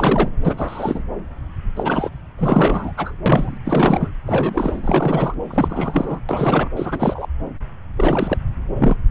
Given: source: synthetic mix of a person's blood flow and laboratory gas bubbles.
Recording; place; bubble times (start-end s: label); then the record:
Doppler ultrasound of blood flow; subclavian vein
0.00-0.29 s: bubbles
0.44-1.03 s: bubbles
1.76-2.11 s: bubbles
2.38-2.92 s: bubbles
2.97-3.15 s: bubbles
3.26-3.58 s: bubbles
3.65-4.10 s: bubbles
4.24-5.34 s: bubbles
5.50-6.19 s: bubbles
6.29-6.69 s: bubbles
6.76-7.26 s: bubbles
7.96-8.38 s: bubbles
8.76-8.96 s: bubbles
From the record:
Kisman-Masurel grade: 332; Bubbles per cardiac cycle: rolling drumbeat, 9 or more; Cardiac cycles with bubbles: 50 to 99%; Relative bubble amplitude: moderate (0.250 to 0.450); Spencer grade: 3 (all of the cardiac periods contain showers or single bubble signals, but not dominating or overriding the cardiac motion signals); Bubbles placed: anywhere in the cardiac cycle